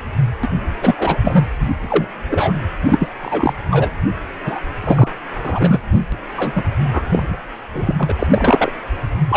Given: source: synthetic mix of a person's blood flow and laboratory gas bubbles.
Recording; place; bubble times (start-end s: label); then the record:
Doppler ultrasound of blood flow; precordium
0.43-0.48 s: bubbles
0.81-0.95 s: bubbles
0.98-1.19 s: bubbles
1.24-1.46 s: bubbles
1.60-1.69 s: bubbles
1.80-2.08 s: bubbles
2.30-2.52 s: bubbles
2.86-3.11 s: bubbles
3.19-3.56 s: bubbles
3.71-3.93 s: bubbles
4.45-4.61 s: bubbles
4.83-5.08 s: bubbles
5.43-5.79 s: bubbles
6.12-6.16 s: bubbles
6.36-6.62 s: bubbles
6.92-7.37 s: bubbles
7.72-7.93 s: bubbles
7.98-8.12 s: bubbles
8.19-8.27 s: bubbles
8.30-8.72 s: bubbles
9.28-9.37 s: bubbles
From the record:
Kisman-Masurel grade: 243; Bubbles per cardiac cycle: several, 3 to 8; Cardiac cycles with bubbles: 100%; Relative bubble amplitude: loud (0.450 to 0.775); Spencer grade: 3 (all of the cardiac periods contain showers or single bubble signals, but not dominating or overriding the cardiac motion signals); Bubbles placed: anywhere in the cardiac cycle